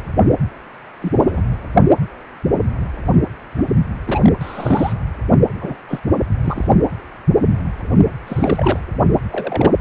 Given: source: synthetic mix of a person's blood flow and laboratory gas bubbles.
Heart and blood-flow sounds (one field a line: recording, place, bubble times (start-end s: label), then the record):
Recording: Doppler ultrasound of blood flow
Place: precordium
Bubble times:
1.01-1.41 s: bubbles
3.57-3.64 s: bubbles
4.08-4.33 s: bubbles
4.41-4.93 s: bubbles
5.54-5.78 s: bubbles
5.88-6.00 s: bubbles
6.44-6.67 s: bubbles
8.26-8.79 s: bubbles
9.30-9.74 s: bubbles
From the record:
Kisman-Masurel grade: 232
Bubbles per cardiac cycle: several, 3 to 8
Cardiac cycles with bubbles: 50 to 99%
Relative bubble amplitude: moderate (0.250 to 0.450)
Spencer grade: 3 (all of the cardiac periods contain showers or single bubble signals, but not dominating or overriding the cardiac motion signals)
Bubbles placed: only in the low amplitude regions of the cardiac cycle